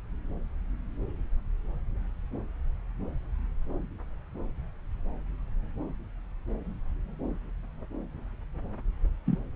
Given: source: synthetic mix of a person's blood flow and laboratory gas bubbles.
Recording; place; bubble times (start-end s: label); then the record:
Doppler ultrasound of blood flow; subclavian vein
9.26-9.38 s: bubbles
From the record:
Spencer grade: 1 (occasional bubble signal discernible with the cardiac motion signal, with majority of cardiac periods free of bubbles); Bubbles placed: anywhere in the cardiac cycle